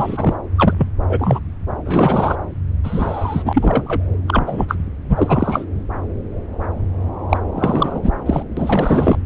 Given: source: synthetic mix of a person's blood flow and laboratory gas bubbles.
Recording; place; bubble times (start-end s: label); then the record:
Doppler ultrasound of blood flow; subclavian vein
0.00-0.34 s: bubbles
0.57-0.75 s: bubbles
0.78-0.88 s: bubbles
1.09-1.40 s: bubbles
1.84-2.37 s: bubbles
2.83-4.09 s: bubbles
4.28-4.65 s: bubbles
4.68-4.75 s: bubbles
5.09-5.64 s: bubbles
7.29-7.38 s: bubbles
7.55-8.12 s: bubbles
8.25-8.42 s: bubbles
8.56-9.19 s: bubbles
From the record:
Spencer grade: 3 (all of the cardiac periods contain showers or single bubble signals, but not dominating or overriding the cardiac motion signals); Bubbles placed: anywhere in the cardiac cycle